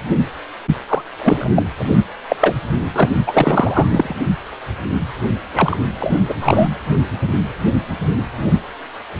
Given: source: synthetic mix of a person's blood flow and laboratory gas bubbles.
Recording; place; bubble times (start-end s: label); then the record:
Doppler ultrasound of blood flow; precordium
0.89-1.02 s: bubbles
1.18-1.49 s: bubbles
1.54-1.62 s: bubbles
1.75-1.86 s: bubbles
2.29-2.36 s: bubbles
2.40-2.56 s: bubbles
2.93-3.09 s: bubbles
3.27-3.87 s: bubbles
3.91-4.14 s: bubbles
5.53-5.76 s: bubbles
6.00-6.20 s: bubbles
6.28-6.35 s: bubbles
6.41-6.68 s: bubbles
From the record:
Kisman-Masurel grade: 233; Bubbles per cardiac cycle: several, 3 to 8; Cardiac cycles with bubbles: 50 to 99%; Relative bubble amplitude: loud (0.450 to 0.775); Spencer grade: 3 (all of the cardiac periods contain showers or single bubble signals, but not dominating or overriding the cardiac motion signals); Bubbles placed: anywhere in the cardiac cycle